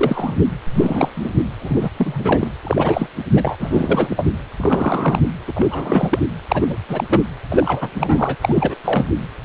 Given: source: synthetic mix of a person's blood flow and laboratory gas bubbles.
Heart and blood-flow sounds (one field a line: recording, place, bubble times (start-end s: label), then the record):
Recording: Doppler ultrasound of blood flow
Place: precordium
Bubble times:
0.00-0.35 s: bubbles
0.75-1.09 s: bubbles
1.16-1.30 s: bubbles
1.60-1.89 s: bubbles
1.96-2.50 s: bubbles
2.63-3.08 s: bubbles
3.34-3.57 s: bubbles
3.59-4.26 s: bubbles
4.58-5.22 s: bubbles
5.46-5.53 s: bubbles
5.55-6.19 s: bubbles
6.50-6.77 s: bubbles
6.88-7.04 s: bubbles
7.09-7.22 s: bubbles
7.50-8.35 s: bubbles
8.42-8.75 s: bubbles
8.84-9.06 s: bubbles
From the record:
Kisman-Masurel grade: 342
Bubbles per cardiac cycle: rolling drumbeat, 9 or more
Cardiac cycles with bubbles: 100%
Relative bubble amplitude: moderate (0.250 to 0.450)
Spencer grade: 3 (all of the cardiac periods contain showers or single bubble signals, but not dominating or overriding the cardiac motion signals)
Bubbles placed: anywhere in the cardiac cycle